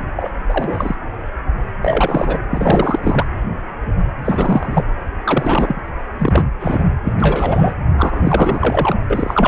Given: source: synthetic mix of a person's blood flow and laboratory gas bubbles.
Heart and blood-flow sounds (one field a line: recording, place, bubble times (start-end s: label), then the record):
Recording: Doppler ultrasound of blood flow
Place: precordium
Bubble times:
0.16-0.31 s: bubbles
0.48-0.95 s: bubbles
1.82-2.39 s: bubbles
2.50-3.26 s: bubbles
4.25-4.84 s: bubbles
5.24-5.81 s: bubbles
6.18-6.43 s: bubbles
6.59-6.85 s: bubbles
7.03-7.13 s: bubbles
7.20-7.74 s: bubbles
7.98-8.95 s: bubbles
9.10-9.48 s: bubbles
From the record:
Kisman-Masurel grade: 333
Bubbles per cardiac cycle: rolling drumbeat, 9 or more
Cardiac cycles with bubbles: 50 to 99%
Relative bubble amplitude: loud (0.450 to 0.775)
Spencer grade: 3 (all of the cardiac periods contain showers or single bubble signals, but not dominating or overriding the cardiac motion signals)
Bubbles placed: anywhere in the cardiac cycle